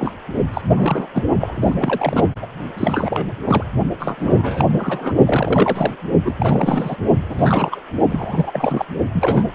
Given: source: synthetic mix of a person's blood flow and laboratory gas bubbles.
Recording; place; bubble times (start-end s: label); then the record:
Doppler ultrasound of blood flow; precordium
0.00-0.14 s: bubbles
0.53-0.61 s: bubbles
0.69-1.07 s: bubbles
1.14-1.24 s: bubbles
1.40-1.75 s: bubbles
1.79-2.25 s: bubbles
2.42-2.47 s: bubbles
2.78-3.27 s: bubbles
3.45-3.64 s: bubbles
3.99-4.64 s: bubbles
4.71-5.13 s: bubbles
5.25-5.93 s: bubbles
6.25-6.96 s: bubbles
7.29-7.80 s: bubbles
8.09-8.86 s: bubbles
9.13-9.46 s: bubbles
From the record:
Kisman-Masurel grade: 342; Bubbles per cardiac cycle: rolling drumbeat, 9 or more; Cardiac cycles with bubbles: 100%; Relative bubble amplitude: moderate (0.250 to 0.450); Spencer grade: 3 (all of the cardiac periods contain showers or single bubble signals, but not dominating or overriding the cardiac motion signals); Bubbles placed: only in the low amplitude regions of the cardiac cycle